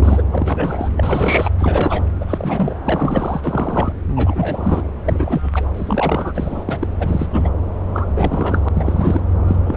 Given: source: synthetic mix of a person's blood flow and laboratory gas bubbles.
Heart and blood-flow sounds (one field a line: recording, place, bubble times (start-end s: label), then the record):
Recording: Doppler ultrasound of blood flow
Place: subclavian vein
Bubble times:
0.00-0.23 s: bubbles
0.32-0.90 s: bubbles
0.96-1.51 s: bubbles
1.58-2.05 s: bubbles
2.21-2.75 s: bubbles
2.84-3.92 s: bubbles
4.16-4.82 s: bubbles
5.05-5.69 s: bubbles
5.74-6.78 s: bubbles
6.81-6.87 s: bubbles
7.00-7.28 s: bubbles
7.32-7.54 s: bubbles
7.93-8.69 s: bubbles
8.75-9.21 s: bubbles
9.47-9.56 s: bubbles
9.64-9.76 s: bubbles
From the record:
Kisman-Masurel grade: 342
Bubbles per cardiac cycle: rolling drumbeat, 9 or more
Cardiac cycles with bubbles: 100%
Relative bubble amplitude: moderate (0.250 to 0.450)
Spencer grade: 3 (all of the cardiac periods contain showers or single bubble signals, but not dominating or overriding the cardiac motion signals)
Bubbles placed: anywhere in the cardiac cycle